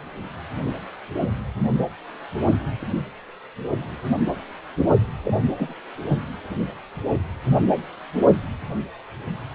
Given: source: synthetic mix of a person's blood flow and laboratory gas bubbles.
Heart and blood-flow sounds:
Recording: Doppler ultrasound of blood flow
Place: precordium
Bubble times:
5.25-5.74 s: bubbles
6.09-6.19 s: bubbles
From the record:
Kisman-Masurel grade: 221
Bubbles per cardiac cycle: several, 3 to 8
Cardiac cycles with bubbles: 10 to 50%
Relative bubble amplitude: barely perceptible (0.100 to 0.250)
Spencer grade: 2 (many but less than half of the cardiac periods contain bubble signals, singularly or in groups)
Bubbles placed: only in the low amplitude regions of the cardiac cycle

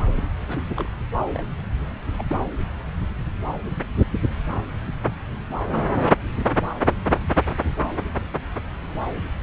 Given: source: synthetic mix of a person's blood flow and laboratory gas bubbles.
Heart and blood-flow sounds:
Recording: Doppler ultrasound of blood flow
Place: subclavian vein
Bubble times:
0.47-0.70 s: bubbles
0.76-0.89 s: bubbles
1.35-1.43 s: bubbles
1.60-1.63 s: bubbles
2.18-2.23 s: bubbles
2.27-2.35 s: bubbles
From the record:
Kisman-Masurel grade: 221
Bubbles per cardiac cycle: several, 3 to 8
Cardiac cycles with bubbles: 10 to 50%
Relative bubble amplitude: barely perceptible (0.100 to 0.250)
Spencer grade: 2 (many but less than half of the cardiac periods contain bubble signals, singularly or in groups)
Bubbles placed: anywhere in the cardiac cycle

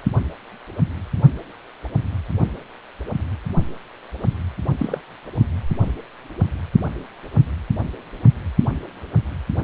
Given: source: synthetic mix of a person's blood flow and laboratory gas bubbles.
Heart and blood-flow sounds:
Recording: Doppler ultrasound of blood flow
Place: precordium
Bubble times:
4.79-5.01 s: bubbles
From the record:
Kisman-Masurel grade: 111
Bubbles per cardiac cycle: 1 to 2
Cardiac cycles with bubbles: 1 to 10%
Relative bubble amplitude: barely perceptible (0.100 to 0.250)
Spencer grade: 1 (occasional bubble signal discernible with the cardiac motion signal, with majority of cardiac periods free of bubbles)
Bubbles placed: only in the low amplitude regions of the cardiac cycle

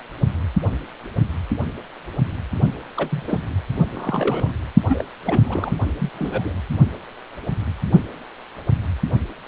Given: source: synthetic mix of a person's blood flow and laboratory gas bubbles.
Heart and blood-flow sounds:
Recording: Doppler ultrasound of blood flow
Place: precordium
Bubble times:
2.96-3.23 s: bubbles
3.27-3.42 s: bubbles
3.92-4.51 s: bubbles
4.88-5.04 s: bubbles
5.25-5.76 s: bubbles
5.98-6.09 s: bubbles
6.16-6.52 s: bubbles
From the record:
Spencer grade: 2 (many but less than half of the cardiac periods contain bubble signals, singularly or in groups)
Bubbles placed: only in the low amplitude regions of the cardiac cycle

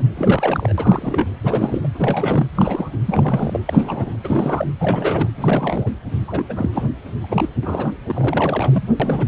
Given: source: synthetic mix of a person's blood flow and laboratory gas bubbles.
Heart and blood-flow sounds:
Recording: Doppler ultrasound of blood flow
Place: precordium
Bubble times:
0.00-0.05 s: bubbles
0.14-0.73 s: bubbles
0.78-1.27 s: bubbles
1.43-1.89 s: bubbles
1.94-2.46 s: bubbles
2.55-2.99 s: bubbles
3.06-3.60 s: bubbles
3.66-4.16 s: bubbles
4.24-4.67 s: bubbles
4.79-5.29 s: bubbles
5.34-5.88 s: bubbles
6.28-6.44 s: bubbles
6.49-6.88 s: bubbles
7.23-7.49 s: bubbles
7.62-7.93 s: bubbles
8.06-8.88 s: bubbles
8.99-9.28 s: bubbles
From the record:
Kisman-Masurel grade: 342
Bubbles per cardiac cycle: rolling drumbeat, 9 or more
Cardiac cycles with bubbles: 100%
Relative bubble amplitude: moderate (0.250 to 0.450)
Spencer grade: 3 (all of the cardiac periods contain showers or single bubble signals, but not dominating or overriding the cardiac motion signals)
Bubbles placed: anywhere in the cardiac cycle

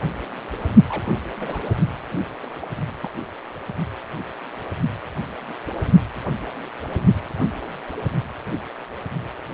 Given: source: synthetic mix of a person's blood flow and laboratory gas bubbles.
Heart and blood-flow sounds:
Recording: Doppler ultrasound of blood flow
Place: precordium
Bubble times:
0.89-1.22 s: bubbles
1.39-1.69 s: bubbles
2.42-2.46 s: bubbles
2.62-2.67 s: bubbles
3.01-3.10 s: bubbles
From the record:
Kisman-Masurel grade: 221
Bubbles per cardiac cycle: several, 3 to 8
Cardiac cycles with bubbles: 10 to 50%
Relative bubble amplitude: barely perceptible (0.100 to 0.250)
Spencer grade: 2 (many but less than half of the cardiac periods contain bubble signals, singularly or in groups)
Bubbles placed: only in the low amplitude regions of the cardiac cycle

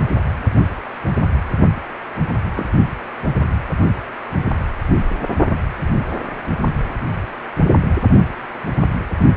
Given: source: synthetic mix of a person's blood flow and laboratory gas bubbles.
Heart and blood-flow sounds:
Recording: Doppler ultrasound of blood flow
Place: precordium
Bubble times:
2.55-2.66 s: bubbles
From the record:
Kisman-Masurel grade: 112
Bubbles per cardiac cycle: 1 to 2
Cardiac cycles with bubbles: 1 to 10%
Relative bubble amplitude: moderate (0.250 to 0.450)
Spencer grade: 1 (occasional bubble signal discernible with the cardiac motion signal, with majority of cardiac periods free of bubbles)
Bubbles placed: only in the low amplitude regions of the cardiac cycle

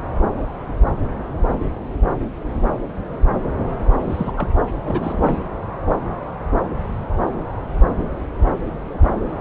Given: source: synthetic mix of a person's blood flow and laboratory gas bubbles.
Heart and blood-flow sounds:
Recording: Doppler ultrasound of blood flow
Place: subclavian vein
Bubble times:
3.99-4.32 s: bubbles
4.36-4.47 s: bubbles
4.84-5.38 s: bubbles
From the record:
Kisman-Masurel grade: 211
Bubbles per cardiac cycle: several, 3 to 8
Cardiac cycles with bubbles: 1 to 10%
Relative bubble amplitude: barely perceptible (0.100 to 0.250)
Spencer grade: 1 (occasional bubble signal discernible with the cardiac motion signal, with majority of cardiac periods free of bubbles)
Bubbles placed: anywhere in the cardiac cycle

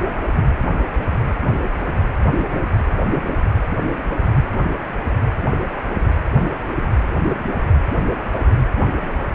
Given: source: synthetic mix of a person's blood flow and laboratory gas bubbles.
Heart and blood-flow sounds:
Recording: Doppler ultrasound of blood flow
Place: precordium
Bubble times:
no bubbles
From the record:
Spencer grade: 0 (complete lack of bubble signals)

